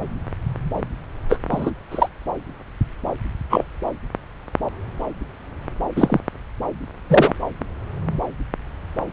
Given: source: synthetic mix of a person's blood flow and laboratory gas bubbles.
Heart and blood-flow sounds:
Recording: Doppler ultrasound of blood flow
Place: subclavian vein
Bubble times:
1.29-1.39 s: bubbles
1.51-1.72 s: bubbles
1.91-2.08 s: bubbles
3.49-3.64 s: bubbles
5.96-6.20 s: bubbles
7.09-7.32 s: bubbles
From the record:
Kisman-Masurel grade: 123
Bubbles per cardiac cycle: 1 to 2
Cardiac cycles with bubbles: 10 to 50%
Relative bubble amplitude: loud (0.450 to 0.775)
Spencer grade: 2 (many but less than half of the cardiac periods contain bubble signals, singularly or in groups)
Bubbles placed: anywhere in the cardiac cycle

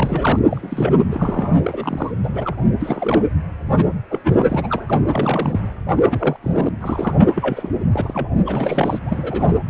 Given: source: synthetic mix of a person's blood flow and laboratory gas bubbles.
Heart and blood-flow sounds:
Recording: Doppler ultrasound of blood flow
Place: precordium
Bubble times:
0.00-0.39 s: bubbles
0.49-0.99 s: bubbles
1.11-1.58 s: bubbles
1.63-2.12 s: bubbles
2.23-2.56 s: bubbles
2.79-3.23 s: bubbles
3.77-3.88 s: bubbles
4.10-4.19 s: bubbles
4.24-4.84 s: bubbles
4.86-5.02 s: bubbles
5.14-5.60 s: bubbles
6.06-6.37 s: bubbles
6.43-6.69 s: bubbles
6.81-7.27 s: bubbles
7.35-7.69 s: bubbles
7.92-8.29 s: bubbles
8.46-8.99 s: bubbles
9.05-9.55 s: bubbles
From the record:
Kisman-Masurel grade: 242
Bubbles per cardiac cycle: several, 3 to 8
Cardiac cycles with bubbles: 100%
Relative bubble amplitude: moderate (0.250 to 0.450)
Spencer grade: 3 (all of the cardiac periods contain showers or single bubble signals, but not dominating or overriding the cardiac motion signals)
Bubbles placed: anywhere in the cardiac cycle

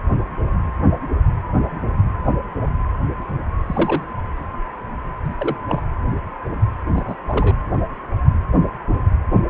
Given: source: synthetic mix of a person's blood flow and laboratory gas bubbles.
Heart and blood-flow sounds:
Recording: Doppler ultrasound of blood flow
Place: precordium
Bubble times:
3.67-4.04 s: bubbles
5.24-5.33 s: bubbles
5.39-5.57 s: bubbles
5.67-5.86 s: bubbles
6.94-7.15 s: bubbles
7.29-7.56 s: bubbles
From the record:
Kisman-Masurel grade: 222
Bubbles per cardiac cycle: several, 3 to 8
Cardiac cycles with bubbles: 10 to 50%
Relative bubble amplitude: moderate (0.250 to 0.450)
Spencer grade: 2 (many but less than half of the cardiac periods contain bubble signals, singularly or in groups)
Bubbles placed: anywhere in the cardiac cycle

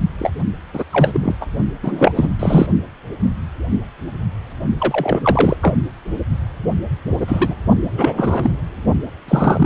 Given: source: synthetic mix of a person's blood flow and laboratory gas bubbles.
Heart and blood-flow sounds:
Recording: Doppler ultrasound of blood flow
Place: precordium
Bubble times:
0.19-0.30 s: bubbles
0.73-0.84 s: bubbles
0.92-1.34 s: bubbles
1.41-1.46 s: bubbles
1.83-2.12 s: bubbles
2.15-2.29 s: bubbles
2.39-2.67 s: bubbles
4.79-5.20 s: bubbles
5.22-5.56 s: bubbles
5.61-5.82 s: bubbles
7.20-7.55 s: bubbles
7.97-8.13 s: bubbles
8.17-8.51 s: bubbles
9.28-9.66 s: bubbles
From the record:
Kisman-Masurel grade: 233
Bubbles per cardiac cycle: several, 3 to 8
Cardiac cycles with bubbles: 50 to 99%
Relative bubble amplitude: loud (0.450 to 0.775)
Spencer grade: 3 (all of the cardiac periods contain showers or single bubble signals, but not dominating or overriding the cardiac motion signals)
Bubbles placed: only in the low amplitude regions of the cardiac cycle

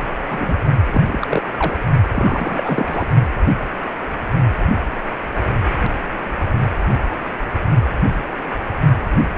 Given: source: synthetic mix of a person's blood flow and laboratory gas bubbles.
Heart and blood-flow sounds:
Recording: Doppler ultrasound of blood flow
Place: precordium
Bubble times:
0.30-0.54 s: bubbles
0.85-1.01 s: bubbles
1.07-1.43 s: bubbles
1.53-1.76 s: bubbles
2.13-3.07 s: bubbles
From the record:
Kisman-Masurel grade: 222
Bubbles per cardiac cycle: several, 3 to 8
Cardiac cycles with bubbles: 10 to 50%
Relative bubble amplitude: moderate (0.250 to 0.450)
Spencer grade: 2 (many but less than half of the cardiac periods contain bubble signals, singularly or in groups)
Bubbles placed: only in the low amplitude regions of the cardiac cycle

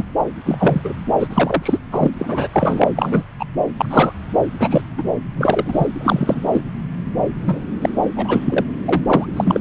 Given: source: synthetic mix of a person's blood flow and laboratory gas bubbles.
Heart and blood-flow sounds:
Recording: Doppler ultrasound of blood flow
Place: subclavian vein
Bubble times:
0.00-0.03 s: bubbles
0.46-0.81 s: bubbles
0.84-0.94 s: bubbles
1.19-1.27 s: bubbles
1.30-1.79 s: bubbles
1.92-2.09 s: bubbles
2.19-2.48 s: bubbles
2.53-2.90 s: bubbles
2.95-3.23 s: bubbles
3.39-3.45 s: bubbles
3.77-4.12 s: bubbles
4.59-4.81 s: bubbles
4.97-5.03 s: bubbles
5.36-5.87 s: bubbles
6.00-6.49 s: bubbles
6.51-6.60 s: bubbles
7.42-7.60 s: bubbles
7.81-7.89 s: bubbles
8.16-8.65 s: bubbles
8.85-9.04 s: bubbles
9.06-9.26 s: bubbles
9.36-9.60 s: bubbles
From the record:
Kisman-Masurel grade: 243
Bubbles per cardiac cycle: several, 3 to 8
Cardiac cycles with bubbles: 100%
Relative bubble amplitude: loud (0.450 to 0.775)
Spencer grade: 3 (all of the cardiac periods contain showers or single bubble signals, but not dominating or overriding the cardiac motion signals)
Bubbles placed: anywhere in the cardiac cycle

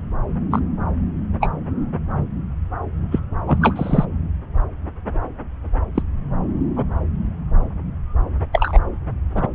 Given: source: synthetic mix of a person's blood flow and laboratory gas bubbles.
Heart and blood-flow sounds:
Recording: Doppler ultrasound of blood flow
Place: subclavian vein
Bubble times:
0.51-0.59 s: bubbles
1.40-1.50 s: bubbles
3.11-3.19 s: bubbles
3.47-4.05 s: bubbles
5.95-6.03 s: bubbles
6.76-6.86 s: bubbles
8.52-8.78 s: bubbles
9.34-9.47 s: bubbles
From the record:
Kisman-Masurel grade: 123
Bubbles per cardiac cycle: 1 to 2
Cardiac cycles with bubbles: 10 to 50%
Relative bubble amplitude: loud (0.450 to 0.775)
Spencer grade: 2 (many but less than half of the cardiac periods contain bubble signals, singularly or in groups)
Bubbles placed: anywhere in the cardiac cycle

